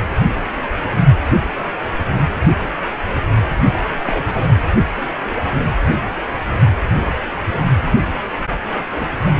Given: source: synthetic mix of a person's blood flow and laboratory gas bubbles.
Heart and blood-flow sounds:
Doppler ultrasound of blood flow; precordium
3.73-3.79 s: bubbles
4.03-4.56 s: bubbles
8.72-8.85 s: bubbles
8.96-9.06 s: bubbles
9.26-9.32 s: bubbles
From the record:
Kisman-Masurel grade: 221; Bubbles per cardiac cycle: several, 3 to 8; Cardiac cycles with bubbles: 10 to 50%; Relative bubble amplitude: barely perceptible (0.100 to 0.250); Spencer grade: 2 (many but less than half of the cardiac periods contain bubble signals, singularly or in groups); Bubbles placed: anywhere in the cardiac cycle

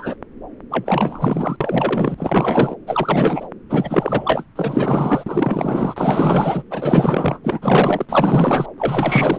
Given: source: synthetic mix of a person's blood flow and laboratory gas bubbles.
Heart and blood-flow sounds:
Doppler ultrasound of blood flow; subclavian vein
0.00-0.15 s: bubbles
0.70-1.57 s: bubbles
1.61-2.75 s: bubbles
2.86-3.47 s: bubbles
3.69-4.44 s: bubbles
4.56-6.63 s: bubbles
6.71-7.39 s: bubbles
7.43-8.05 s: bubbles
8.09-8.66 s: bubbles
8.78-9.39 s: bubbles
From the record:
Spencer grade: 4 (maximum detectable bubble signal sounding continuously throughout systole and diastole of every cardiac period, and overriding the amplitude of the normal cardiac signals); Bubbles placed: anywhere in the cardiac cycle

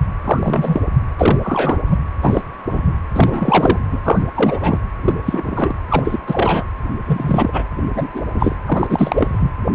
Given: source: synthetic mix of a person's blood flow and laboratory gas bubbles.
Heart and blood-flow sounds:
Doppler ultrasound of blood flow; precordium
0.25-0.81 s: bubbles
1.17-1.39 s: bubbles
1.42-1.77 s: bubbles
1.90-1.99 s: bubbles
2.22-2.43 s: bubbles
2.70-2.93 s: bubbles
3.14-3.79 s: bubbles
3.92-4.01 s: bubbles
4.04-4.22 s: bubbles
4.34-4.78 s: bubbles
5.05-5.15 s: bubbles
5.25-5.75 s: bubbles
5.90-6.19 s: bubbles
6.27-6.64 s: bubbles
7.07-7.65 s: bubbles
7.95-8.07 s: bubbles
8.13-8.24 s: bubbles
8.34-8.55 s: bubbles
8.65-9.52 s: bubbles
From the record:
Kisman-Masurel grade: 233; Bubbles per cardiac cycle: several, 3 to 8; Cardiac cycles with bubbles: 50 to 99%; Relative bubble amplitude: loud (0.450 to 0.775); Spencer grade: 3 (all of the cardiac periods contain showers or single bubble signals, but not dominating or overriding the cardiac motion signals); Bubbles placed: anywhere in the cardiac cycle

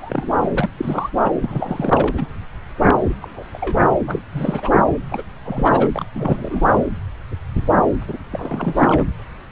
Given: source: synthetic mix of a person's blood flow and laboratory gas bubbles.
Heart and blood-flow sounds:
Doppler ultrasound of blood flow; subclavian vein
0.00-0.29 s: bubbles
0.43-0.49 s: bubbles
0.55-0.70 s: bubbles
0.77-1.10 s: bubbles
1.21-1.32 s: bubbles
1.41-2.27 s: bubbles
2.82-2.98 s: bubbles
3.04-3.15 s: bubbles
3.21-3.43 s: bubbles
3.54-3.58 s: bubbles
3.60-3.88 s: bubbles
4.07-4.20 s: bubbles
4.31-4.71 s: bubbles
5.10-5.24 s: bubbles
5.45-6.04 s: bubbles
6.14-6.78 s: bubbles
8.07-8.18 s: bubbles
8.31-9.05 s: bubbles
From the record:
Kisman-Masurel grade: 332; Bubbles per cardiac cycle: rolling drumbeat, 9 or more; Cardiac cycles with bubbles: 50 to 99%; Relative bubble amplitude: moderate (0.250 to 0.450); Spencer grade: 3 (all of the cardiac periods contain showers or single bubble signals, but not dominating or overriding the cardiac motion signals); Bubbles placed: anywhere in the cardiac cycle

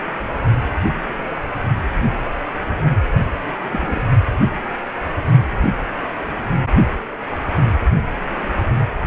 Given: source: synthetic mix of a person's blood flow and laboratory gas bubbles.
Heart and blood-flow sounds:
Doppler ultrasound of blood flow; precordium
3.72-4.04 s: bubbles
From the record:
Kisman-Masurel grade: 112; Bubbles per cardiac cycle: 1 to 2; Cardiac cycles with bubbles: 1 to 10%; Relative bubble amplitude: moderate (0.250 to 0.450); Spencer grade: 1 (occasional bubble signal discernible with the cardiac motion signal, with majority of cardiac periods free of bubbles); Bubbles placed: only in the low amplitude regions of the cardiac cycle

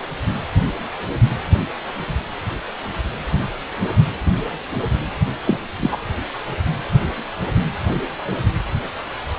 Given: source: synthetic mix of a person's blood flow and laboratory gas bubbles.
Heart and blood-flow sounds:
Doppler ultrasound of blood flow; precordium
5.45-5.59 s: bubbles
5.79-5.96 s: bubbles
From the record:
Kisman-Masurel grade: 223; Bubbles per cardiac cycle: several, 3 to 8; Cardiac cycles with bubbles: 10 to 50%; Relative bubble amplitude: loud (0.450 to 0.775); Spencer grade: 2 (many but less than half of the cardiac periods contain bubble signals, singularly or in groups); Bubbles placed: anywhere in the cardiac cycle

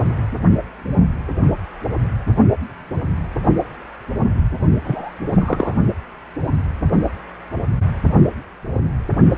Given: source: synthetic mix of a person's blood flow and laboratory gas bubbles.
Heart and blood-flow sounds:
Doppler ultrasound of blood flow; precordium
4.84-5.12 s: bubbles
5.39-5.74 s: bubbles
From the record:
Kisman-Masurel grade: 112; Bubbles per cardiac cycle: 1 to 2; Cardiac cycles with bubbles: 1 to 10%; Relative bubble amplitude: moderate (0.250 to 0.450); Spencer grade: 1 (occasional bubble signal discernible with the cardiac motion signal, with majority of cardiac periods free of bubbles); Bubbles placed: only in the low amplitude regions of the cardiac cycle

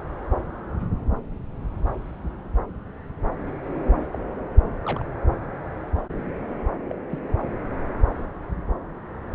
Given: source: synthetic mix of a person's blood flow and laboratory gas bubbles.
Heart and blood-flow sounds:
Doppler ultrasound of blood flow; subclavian vein
4.09-4.19 s: bubbles
4.85-5.04 s: bubbles
6.89-6.93 s: bubbles
7.10-7.19 s: bubbles
From the record:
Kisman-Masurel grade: 121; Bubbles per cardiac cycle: 1 to 2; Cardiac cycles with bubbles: 10 to 50%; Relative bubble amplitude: barely perceptible (0.100 to 0.250); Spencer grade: 2 (many but less than half of the cardiac periods contain bubble signals, singularly or in groups); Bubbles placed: anywhere in the cardiac cycle

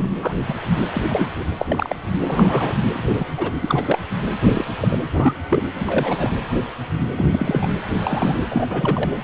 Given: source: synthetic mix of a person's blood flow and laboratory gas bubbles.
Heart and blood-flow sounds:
Doppler ultrasound of blood flow; precordium
0.00-0.09 s: bubbles
0.22-0.37 s: bubbles
0.49-0.54 s: bubbles
0.94-1.30 s: bubbles
1.39-1.44 s: bubbles
1.59-1.96 s: bubbles
2.27-2.76 s: bubbles
2.94-3.25 s: bubbles
3.38-3.50 s: bubbles
3.61-3.99 s: bubbles
4.39-4.66 s: bubbles
4.81-4.99 s: bubbles
5.12-5.33 s: bubbles
5.50-5.62 s: bubbles
5.74-6.34 s: bubbles
7.17-7.25 s: bubbles
7.30-7.76 s: bubbles
7.98-8.41 s: bubbles
8.50-8.67 s: bubbles
8.70-9.10 s: bubbles
From the record:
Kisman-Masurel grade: 232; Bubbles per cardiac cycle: several, 3 to 8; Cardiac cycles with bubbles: 50 to 99%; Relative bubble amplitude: moderate (0.250 to 0.450); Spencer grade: 3 (all of the cardiac periods contain showers or single bubble signals, but not dominating or overriding the cardiac motion signals); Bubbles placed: anywhere in the cardiac cycle

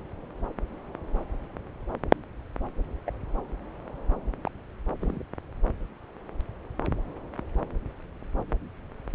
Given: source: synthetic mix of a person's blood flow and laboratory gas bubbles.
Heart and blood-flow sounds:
Doppler ultrasound of blood flow; subclavian vein
3.06-3.10 s: bubbles
4.47-4.50 s: bubbles
5.01-5.23 s: bubbles
From the record:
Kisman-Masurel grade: 121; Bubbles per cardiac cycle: 1 to 2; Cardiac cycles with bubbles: 10 to 50%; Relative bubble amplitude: barely perceptible (0.100 to 0.250); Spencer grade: 2 (many but less than half of the cardiac periods contain bubble signals, singularly or in groups); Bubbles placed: anywhere in the cardiac cycle

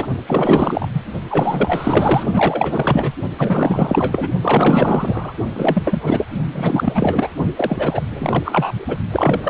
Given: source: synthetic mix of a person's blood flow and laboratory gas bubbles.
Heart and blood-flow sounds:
Doppler ultrasound of blood flow; precordium
0.00-0.07 s: bubbles
0.28-0.89 s: bubbles
0.92-1.03 s: bubbles
1.29-2.24 s: bubbles
2.33-3.12 s: bubbles
3.38-4.29 s: bubbles
4.42-5.32 s: bubbles
5.54-6.25 s: bubbles
6.52-7.30 s: bubbles
7.56-8.03 s: bubbles
8.14-8.96 s: bubbles
9.11-9.50 s: bubbles
From the record:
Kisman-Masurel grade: 444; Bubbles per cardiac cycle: continuous sound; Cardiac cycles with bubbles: 100%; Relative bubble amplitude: maximal (0.775 to 0.999); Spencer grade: 4 (maximum detectable bubble signal sounding continuously throughout systole and diastole of every cardiac period, and overriding the amplitude of the normal cardiac signals); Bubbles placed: only in the low amplitude regions of the cardiac cycle

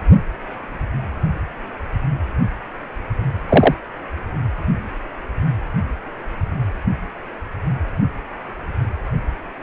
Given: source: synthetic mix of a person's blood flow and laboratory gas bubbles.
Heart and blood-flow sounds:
Doppler ultrasound of blood flow; precordium
3.49-3.75 s: bubbles
From the record:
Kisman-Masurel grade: 113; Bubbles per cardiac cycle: 1 to 2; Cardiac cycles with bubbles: 1 to 10%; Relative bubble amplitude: loud (0.450 to 0.775); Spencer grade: 1 (occasional bubble signal discernible with the cardiac motion signal, with majority of cardiac periods free of bubbles); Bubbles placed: anywhere in the cardiac cycle

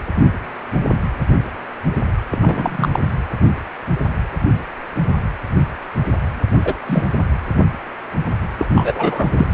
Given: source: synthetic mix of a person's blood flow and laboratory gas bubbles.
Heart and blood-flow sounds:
Doppler ultrasound of blood flow; precordium
2.30-2.89 s: bubbles
2.92-2.99 s: bubbles
6.64-6.75 s: bubbles
6.87-7.04 s: bubbles
8.57-8.67 s: bubbles
8.75-9.47 s: bubbles
From the record:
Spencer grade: 2 (many but less than half of the cardiac periods contain bubble signals, singularly or in groups); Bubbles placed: anywhere in the cardiac cycle

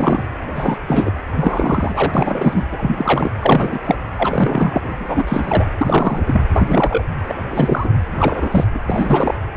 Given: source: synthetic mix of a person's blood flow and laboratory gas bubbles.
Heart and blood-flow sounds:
Doppler ultrasound of blood flow; precordium
0.00-0.25 s: bubbles
0.55-0.78 s: bubbles
0.88-1.12 s: bubbles
1.35-2.66 s: bubbles
2.71-3.31 s: bubbles
3.40-3.79 s: bubbles
3.84-3.96 s: bubbles
4.17-4.93 s: bubbles
4.98-5.25 s: bubbles
5.27-5.64 s: bubbles
5.77-6.41 s: bubbles
6.52-7.04 s: bubbles
7.27-7.34 s: bubbles
7.50-7.98 s: bubbles
8.18-8.65 s: bubbles
8.73-8.79 s: bubbles
8.87-9.35 s: bubbles
From the record:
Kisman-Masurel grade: 343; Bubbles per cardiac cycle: rolling drumbeat, 9 or more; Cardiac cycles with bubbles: 100%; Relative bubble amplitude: loud (0.450 to 0.775); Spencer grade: 3 (all of the cardiac periods contain showers or single bubble signals, but not dominating or overriding the cardiac motion signals); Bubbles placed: anywhere in the cardiac cycle

